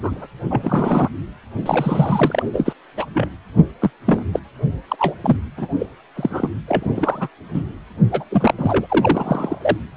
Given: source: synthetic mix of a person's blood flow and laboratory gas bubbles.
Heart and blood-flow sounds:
Doppler ultrasound of blood flow; precordium
0.03-0.27 s: bubbles
0.50-1.09 s: bubbles
1.66-2.42 s: bubbles
2.53-2.73 s: bubbles
2.96-3.06 s: bubbles
3.14-3.28 s: bubbles
3.81-3.90 s: bubbles
4.05-4.24 s: bubbles
4.33-4.39 s: bubbles
4.88-4.96 s: bubbles
4.99-5.15 s: bubbles
5.23-5.37 s: bubbles
5.57-5.67 s: bubbles
5.79-5.87 s: bubbles
6.16-6.50 s: bubbles
6.67-6.91 s: bubbles
6.94-7.28 s: bubbles
7.54-7.63 s: bubbles
8.11-8.24 s: bubbles
8.30-8.54 s: bubbles
8.57-9.59 s: bubbles
9.62-9.77 s: bubbles
From the record:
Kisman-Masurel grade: 243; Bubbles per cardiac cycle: several, 3 to 8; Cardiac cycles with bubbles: 100%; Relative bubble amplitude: loud (0.450 to 0.775); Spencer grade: 3 (all of the cardiac periods contain showers or single bubble signals, but not dominating or overriding the cardiac motion signals); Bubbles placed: anywhere in the cardiac cycle

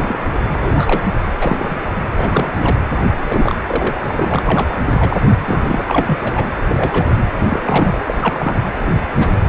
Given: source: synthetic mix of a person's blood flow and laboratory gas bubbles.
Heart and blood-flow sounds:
Doppler ultrasound of blood flow; precordium
0.00-0.17 s: bubbles
0.53-1.13 s: bubbles
1.40-1.76 s: bubbles
2.17-2.52 s: bubbles
2.58-2.76 s: bubbles
3.19-3.55 s: bubbles
3.67-3.96 s: bubbles
4.04-4.42 s: bubbles
4.46-4.68 s: bubbles
4.95-5.17 s: bubbles
5.35-5.82 s: bubbles
5.87-6.48 s: bubbles
6.68-7.15 s: bubbles
7.46-7.60 s: bubbles
7.62-8.00 s: bubbles
8.07-8.16 s: bubbles
8.21-8.61 s: bubbles
8.94-9.00 s: bubbles
9.16-9.31 s: bubbles
From the record:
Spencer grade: 3 (all of the cardiac periods contain showers or single bubble signals, but not dominating or overriding the cardiac motion signals); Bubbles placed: anywhere in the cardiac cycle

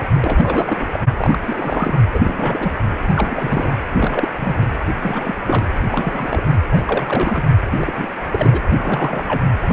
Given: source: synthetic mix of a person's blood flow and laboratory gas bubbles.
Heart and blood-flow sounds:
Doppler ultrasound of blood flow; precordium
0.20-0.87 s: bubbles
0.93-1.06 s: bubbles
1.17-1.39 s: bubbles
1.41-2.08 s: bubbles
2.13-2.73 s: bubbles
3.09-3.73 s: bubbles
3.96-4.29 s: bubbles
4.38-4.54 s: bubbles
4.58-4.67 s: bubbles
4.97-5.35 s: bubbles
5.45-5.79 s: bubbles
5.91-6.41 s: bubbles
6.45-6.57 s: bubbles
6.71-7.43 s: bubbles
7.71-8.07 s: bubbles
8.30-8.61 s: bubbles
8.76-9.50 s: bubbles
9.67-9.73 s: bubbles
From the record:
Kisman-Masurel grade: 342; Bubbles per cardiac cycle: rolling drumbeat, 9 or more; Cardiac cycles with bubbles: 100%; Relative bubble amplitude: moderate (0.250 to 0.450); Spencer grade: 3 (all of the cardiac periods contain showers or single bubble signals, but not dominating or overriding the cardiac motion signals); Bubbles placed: anywhere in the cardiac cycle

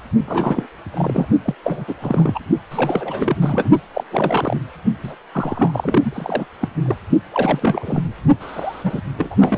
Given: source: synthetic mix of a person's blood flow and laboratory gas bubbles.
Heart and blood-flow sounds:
Doppler ultrasound of blood flow; precordium
0.27-0.67 s: bubbles
0.94-1.28 s: bubbles
1.45-1.55 s: bubbles
1.62-1.84 s: bubbles
1.87-1.95 s: bubbles
2.01-2.40 s: bubbles
2.70-3.36 s: bubbles
3.40-3.71 s: bubbles
3.94-4.04 s: bubbles
4.12-4.60 s: bubbles
5.03-5.16 s: bubbles
5.32-6.46 s: bubbles
6.60-6.68 s: bubbles
6.85-6.96 s: bubbles
7.32-8.03 s: bubbles
8.40-9.01 s: bubbles
9.18-9.36 s: bubbles
9.40-9.57 s: bubbles
From the record:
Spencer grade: 3 (all of the cardiac periods contain showers or single bubble signals, but not dominating or overriding the cardiac motion signals); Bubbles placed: only in the low amplitude regions of the cardiac cycle

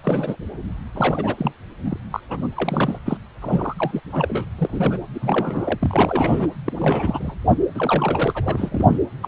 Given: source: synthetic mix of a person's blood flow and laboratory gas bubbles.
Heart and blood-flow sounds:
Doppler ultrasound of blood flow; precordium
0.03-0.36 s: bubbles
0.95-1.53 s: bubbles
1.85-1.97 s: bubbles
2.10-2.20 s: bubbles
2.29-2.48 s: bubbles
2.56-2.99 s: bubbles
3.05-3.17 s: bubbles
3.42-4.00 s: bubbles
4.12-4.45 s: bubbles
4.58-4.98 s: bubbles
5.14-5.79 s: bubbles
5.82-6.48 s: bubbles
6.66-6.73 s: bubbles
6.79-7.34 s: bubbles
7.47-7.54 s: bubbles
7.75-8.98 s: bubbles
9.22-9.27 s: bubbles
From the record:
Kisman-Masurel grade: 342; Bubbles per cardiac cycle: rolling drumbeat, 9 or more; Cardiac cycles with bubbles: 100%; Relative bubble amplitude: moderate (0.250 to 0.450); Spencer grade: 3 (all of the cardiac periods contain showers or single bubble signals, but not dominating or overriding the cardiac motion signals); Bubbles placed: anywhere in the cardiac cycle

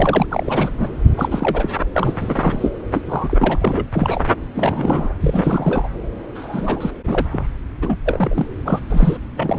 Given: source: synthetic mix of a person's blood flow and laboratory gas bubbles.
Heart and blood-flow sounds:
Doppler ultrasound of blood flow; subclavian vein
0.00-0.27 s: bubbles
0.29-0.72 s: bubbles
0.77-0.88 s: bubbles
1.17-1.70 s: bubbles
1.92-2.71 s: bubbles
2.92-3.02 s: bubbles
3.06-3.87 s: bubbles
3.92-4.27 s: bubbles
4.55-5.13 s: bubbles
5.20-5.88 s: bubbles
6.35-6.91 s: bubbles
7.04-7.27 s: bubbles
7.32-7.47 s: bubbles
7.82-7.99 s: bubbles
8.06-8.47 s: bubbles
8.65-8.81 s: bubbles
8.90-9.18 s: bubbles
9.36-9.59 s: bubbles
From the record:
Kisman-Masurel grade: 342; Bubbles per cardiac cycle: rolling drumbeat, 9 or more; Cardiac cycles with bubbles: 100%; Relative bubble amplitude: moderate (0.250 to 0.450); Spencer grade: 3 (all of the cardiac periods contain showers or single bubble signals, but not dominating or overriding the cardiac motion signals); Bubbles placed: anywhere in the cardiac cycle

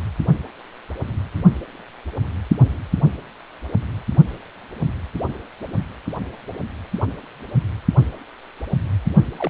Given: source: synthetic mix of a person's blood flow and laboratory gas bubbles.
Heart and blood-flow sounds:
Doppler ultrasound of blood flow; precordium
9.37-9.50 s: bubbles
From the record:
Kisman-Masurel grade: 121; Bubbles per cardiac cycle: 1 to 2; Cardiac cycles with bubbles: 10 to 50%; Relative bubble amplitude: barely perceptible (0.100 to 0.250); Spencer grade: 2 (many but less than half of the cardiac periods contain bubble signals, singularly or in groups); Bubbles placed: anywhere in the cardiac cycle

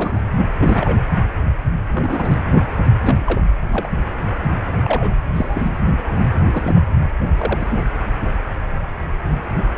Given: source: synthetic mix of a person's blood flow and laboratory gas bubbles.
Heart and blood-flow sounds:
Doppler ultrasound of blood flow; precordium
0.00-0.21 s: bubbles
0.60-0.95 s: bubbles
1.94-2.44 s: bubbles
3.02-3.43 s: bubbles
3.71-3.89 s: bubbles
4.84-5.13 s: bubbles
5.34-5.69 s: bubbles
6.45-6.80 s: bubbles
7.35-7.83 s: bubbles
From the record:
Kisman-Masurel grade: 232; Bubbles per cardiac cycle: several, 3 to 8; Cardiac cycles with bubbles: 50 to 99%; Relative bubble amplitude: moderate (0.250 to 0.450); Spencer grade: 3 (all of the cardiac periods contain showers or single bubble signals, but not dominating or overriding the cardiac motion signals); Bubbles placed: anywhere in the cardiac cycle

